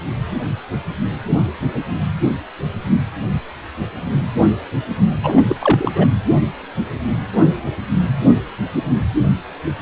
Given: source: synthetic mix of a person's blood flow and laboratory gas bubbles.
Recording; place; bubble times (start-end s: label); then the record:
Doppler ultrasound of blood flow; precordium
5.23-5.42 s: bubbles
5.47-5.55 s: bubbles
5.61-5.92 s: bubbles
5.96-6.07 s: bubbles
From the record:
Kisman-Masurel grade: 213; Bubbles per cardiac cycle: several, 3 to 8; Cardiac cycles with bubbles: 1 to 10%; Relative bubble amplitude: loud (0.450 to 0.775); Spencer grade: 1 (occasional bubble signal discernible with the cardiac motion signal, with majority of cardiac periods free of bubbles); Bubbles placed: anywhere in the cardiac cycle